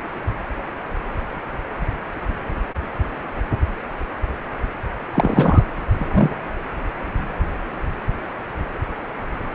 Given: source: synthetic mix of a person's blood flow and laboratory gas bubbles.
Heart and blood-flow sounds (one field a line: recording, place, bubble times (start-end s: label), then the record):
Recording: Doppler ultrasound of blood flow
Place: precordium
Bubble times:
5.11-5.62 s: bubbles
5.97-6.36 s: bubbles
From the record:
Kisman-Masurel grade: 223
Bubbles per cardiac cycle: several, 3 to 8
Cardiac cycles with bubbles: 10 to 50%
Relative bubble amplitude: loud (0.450 to 0.775)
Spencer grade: 2 (many but less than half of the cardiac periods contain bubble signals, singularly or in groups)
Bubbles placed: anywhere in the cardiac cycle